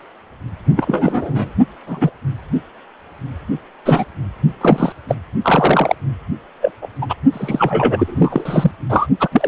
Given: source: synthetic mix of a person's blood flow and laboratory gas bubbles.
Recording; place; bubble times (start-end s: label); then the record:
Doppler ultrasound of blood flow; precordium
0.76-1.52 s: bubbles
1.86-2.11 s: bubbles
3.85-4.05 s: bubbles
4.61-4.92 s: bubbles
5.08-5.16 s: bubbles
5.42-5.96 s: bubbles
6.61-6.71 s: bubbles
6.82-6.88 s: bubbles
7.01-7.07 s: bubbles
7.09-7.14 s: bubbles
7.32-8.72 s: bubbles
8.89-9.08 s: bubbles
9.20-9.29 s: bubbles
9.32-9.48 s: bubbles
From the record:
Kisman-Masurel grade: 233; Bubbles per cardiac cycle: several, 3 to 8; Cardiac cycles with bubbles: 50 to 99%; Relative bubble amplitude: loud (0.450 to 0.775); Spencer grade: 3 (all of the cardiac periods contain showers or single bubble signals, but not dominating or overriding the cardiac motion signals); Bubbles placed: only in the low amplitude regions of the cardiac cycle